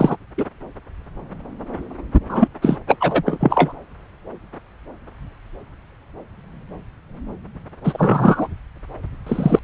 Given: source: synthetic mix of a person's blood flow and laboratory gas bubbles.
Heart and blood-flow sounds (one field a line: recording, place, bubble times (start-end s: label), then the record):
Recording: Doppler ultrasound of blood flow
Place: subclavian vein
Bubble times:
0.00-0.16 s: bubbles
0.38-0.45 s: bubbles
2.29-2.48 s: bubbles
2.61-2.77 s: bubbles
2.88-2.96 s: bubbles
3.00-3.72 s: bubbles
7.84-8.47 s: bubbles
9.26-9.60 s: bubbles
From the record:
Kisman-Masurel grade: 233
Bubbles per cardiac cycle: several, 3 to 8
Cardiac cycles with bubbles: 50 to 99%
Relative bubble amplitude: loud (0.450 to 0.775)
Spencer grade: 3 (all of the cardiac periods contain showers or single bubble signals, but not dominating or overriding the cardiac motion signals)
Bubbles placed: anywhere in the cardiac cycle